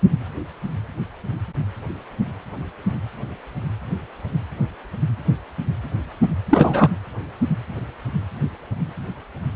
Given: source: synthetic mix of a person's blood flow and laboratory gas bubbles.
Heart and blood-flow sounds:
Doppler ultrasound of blood flow; precordium
6.50-6.91 s: bubbles
From the record:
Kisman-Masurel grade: 213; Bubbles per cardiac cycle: several, 3 to 8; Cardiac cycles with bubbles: 1 to 10%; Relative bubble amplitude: loud (0.450 to 0.775); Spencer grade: 1 (occasional bubble signal discernible with the cardiac motion signal, with majority of cardiac periods free of bubbles); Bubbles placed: anywhere in the cardiac cycle

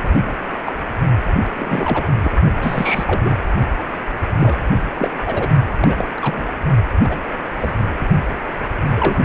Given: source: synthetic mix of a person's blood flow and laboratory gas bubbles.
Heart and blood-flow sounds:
Doppler ultrasound of blood flow; precordium
0.03-0.35 s: bubbles
0.65-0.73 s: bubbles
1.34-1.39 s: bubbles
1.59-2.08 s: bubbles
2.23-2.33 s: bubbles
2.61-3.21 s: bubbles
3.24-3.34 s: bubbles
4.39-4.58 s: bubbles
4.94-5.10 s: bubbles
5.26-5.50 s: bubbles
5.80-6.08 s: bubbles
6.17-6.46 s: bubbles
7.03-7.20 s: bubbles
7.60-7.72 s: bubbles
8.00-8.05 s: bubbles
8.89-9.19 s: bubbles
From the record:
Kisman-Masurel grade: 242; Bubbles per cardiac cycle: several, 3 to 8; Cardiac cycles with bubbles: 100%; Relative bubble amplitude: moderate (0.250 to 0.450); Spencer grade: 3 (all of the cardiac periods contain showers or single bubble signals, but not dominating or overriding the cardiac motion signals); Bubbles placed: only in the low amplitude regions of the cardiac cycle

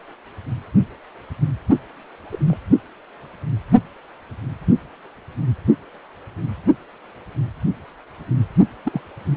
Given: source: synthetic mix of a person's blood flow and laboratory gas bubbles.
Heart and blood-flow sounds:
Doppler ultrasound of blood flow; precordium
2.31-2.39 s: bubbles
2.45-2.56 s: bubbles
8.85-9.01 s: bubbles
From the record:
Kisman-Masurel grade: 122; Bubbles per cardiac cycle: 1 to 2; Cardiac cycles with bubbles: 10 to 50%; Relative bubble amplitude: moderate (0.250 to 0.450); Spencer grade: 2 (many but less than half of the cardiac periods contain bubble signals, singularly or in groups); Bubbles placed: only in the low amplitude regions of the cardiac cycle

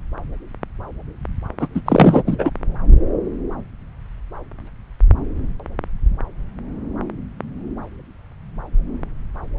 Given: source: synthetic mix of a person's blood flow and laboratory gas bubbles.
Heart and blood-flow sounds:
Doppler ultrasound of blood flow; subclavian vein
1.59-1.68 s: bubbles
1.75-1.81 s: bubbles
1.85-2.23 s: bubbles
2.27-2.50 s: bubbles
From the record:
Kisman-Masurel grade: 213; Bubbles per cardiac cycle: several, 3 to 8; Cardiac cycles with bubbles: 1 to 10%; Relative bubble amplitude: loud (0.450 to 0.775); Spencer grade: 1 (occasional bubble signal discernible with the cardiac motion signal, with majority of cardiac periods free of bubbles); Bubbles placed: anywhere in the cardiac cycle

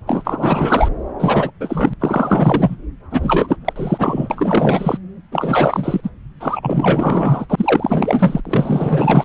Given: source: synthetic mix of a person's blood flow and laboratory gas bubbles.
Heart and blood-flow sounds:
Doppler ultrasound of blood flow; subclavian vein
0.07-0.88 s: bubbles
1.18-1.51 s: bubbles
1.60-1.94 s: bubbles
2.00-2.76 s: bubbles
3.10-3.56 s: bubbles
3.64-3.73 s: bubbles
3.75-4.27 s: bubbles
4.30-4.98 s: bubbles
5.31-6.10 s: bubbles
6.40-7.46 s: bubbles
7.49-8.41 s: bubbles
8.45-9.24 s: bubbles
From the record:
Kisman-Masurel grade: 444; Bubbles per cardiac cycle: continuous sound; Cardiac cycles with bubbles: 100%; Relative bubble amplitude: maximal (0.775 to 0.999); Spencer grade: 4 (maximum detectable bubble signal sounding continuously throughout systole and diastole of every cardiac period, and overriding the amplitude of the normal cardiac signals); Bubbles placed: anywhere in the cardiac cycle

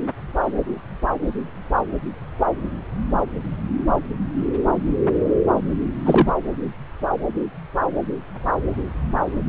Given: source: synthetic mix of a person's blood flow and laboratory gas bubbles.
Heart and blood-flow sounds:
Doppler ultrasound of blood flow; subclavian vein
6.04-6.33 s: bubbles
From the record:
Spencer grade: 1 (occasional bubble signal discernible with the cardiac motion signal, with majority of cardiac periods free of bubbles); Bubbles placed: anywhere in the cardiac cycle

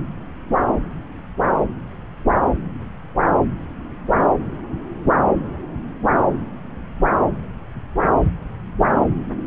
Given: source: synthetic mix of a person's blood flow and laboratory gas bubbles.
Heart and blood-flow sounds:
Doppler ultrasound of blood flow; subclavian vein
no bubbles
From the record:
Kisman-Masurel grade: 000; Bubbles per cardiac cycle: 0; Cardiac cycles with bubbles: 0%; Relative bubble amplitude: no bubbles discernible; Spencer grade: 0 (complete lack of bubble signals)

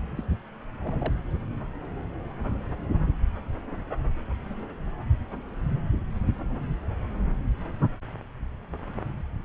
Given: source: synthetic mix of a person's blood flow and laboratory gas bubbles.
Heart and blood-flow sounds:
Doppler ultrasound of blood flow; subclavian vein
0.16-0.23 s: bubbles
0.83-1.13 s: bubbles
From the record:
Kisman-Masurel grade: 211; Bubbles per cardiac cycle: several, 3 to 8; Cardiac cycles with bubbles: 1 to 10%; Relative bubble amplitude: barely perceptible (0.100 to 0.250); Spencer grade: 1 (occasional bubble signal discernible with the cardiac motion signal, with majority of cardiac periods free of bubbles); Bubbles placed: anywhere in the cardiac cycle

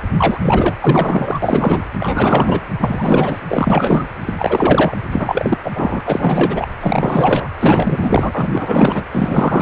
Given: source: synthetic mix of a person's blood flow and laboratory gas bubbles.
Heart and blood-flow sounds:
Doppler ultrasound of blood flow; precordium
0.18-0.77 s: bubbles
0.82-1.40 s: bubbles
1.42-1.86 s: bubbles
1.98-2.61 s: bubbles
2.80-3.40 s: bubbles
3.48-4.04 s: bubbles
4.21-4.97 s: bubbles
5.12-5.58 s: bubbles
5.63-5.71 s: bubbles
5.75-6.01 s: bubbles
6.05-6.67 s: bubbles
6.79-7.48 s: bubbles
7.59-9.05 s: bubbles
9.11-9.62 s: bubbles
From the record:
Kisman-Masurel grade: 444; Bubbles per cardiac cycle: continuous sound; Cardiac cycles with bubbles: 100%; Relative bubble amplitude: maximal (0.775 to 0.999); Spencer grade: 4 (maximum detectable bubble signal sounding continuously throughout systole and diastole of every cardiac period, and overriding the amplitude of the normal cardiac signals); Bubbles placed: anywhere in the cardiac cycle

